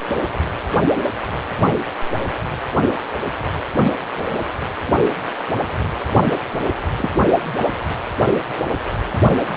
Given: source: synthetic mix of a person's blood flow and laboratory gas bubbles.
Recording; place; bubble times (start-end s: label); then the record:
Doppler ultrasound of blood flow; precordium
6.25-6.33 s: bubbles
6.98-7.10 s: bubbles
From the record:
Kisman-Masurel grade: 122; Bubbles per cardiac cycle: 1 to 2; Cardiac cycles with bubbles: 10 to 50%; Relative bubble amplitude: moderate (0.250 to 0.450); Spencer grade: 2 (many but less than half of the cardiac periods contain bubble signals, singularly or in groups); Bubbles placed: only in the low amplitude regions of the cardiac cycle